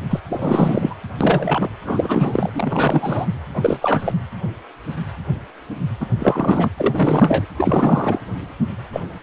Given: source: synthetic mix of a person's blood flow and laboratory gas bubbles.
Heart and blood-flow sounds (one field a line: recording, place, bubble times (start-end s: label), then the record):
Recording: Doppler ultrasound of blood flow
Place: precordium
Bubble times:
0.10-0.20 s: bubbles
0.29-0.96 s: bubbles
1.21-1.69 s: bubbles
1.85-2.50 s: bubbles
2.54-3.27 s: bubbles
3.54-4.12 s: bubbles
6.00-6.06 s: bubbles
6.18-6.69 s: bubbles
6.77-7.46 s: bubbles
7.57-8.21 s: bubbles
8.92-9.01 s: bubbles
From the record:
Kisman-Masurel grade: 333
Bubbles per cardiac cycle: rolling drumbeat, 9 or more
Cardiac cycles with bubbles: 50 to 99%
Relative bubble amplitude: loud (0.450 to 0.775)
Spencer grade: 3 (all of the cardiac periods contain showers or single bubble signals, but not dominating or overriding the cardiac motion signals)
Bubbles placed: anywhere in the cardiac cycle